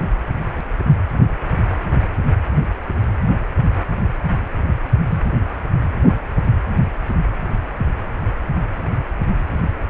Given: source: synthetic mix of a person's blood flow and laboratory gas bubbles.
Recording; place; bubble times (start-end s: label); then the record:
Doppler ultrasound of blood flow; precordium
5.11-5.22 s: bubbles
From the record:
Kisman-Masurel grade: 122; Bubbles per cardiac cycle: 1 to 2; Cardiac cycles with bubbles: 10 to 50%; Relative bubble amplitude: moderate (0.250 to 0.450); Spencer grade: 2 (many but less than half of the cardiac periods contain bubble signals, singularly or in groups); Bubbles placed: only in the low amplitude regions of the cardiac cycle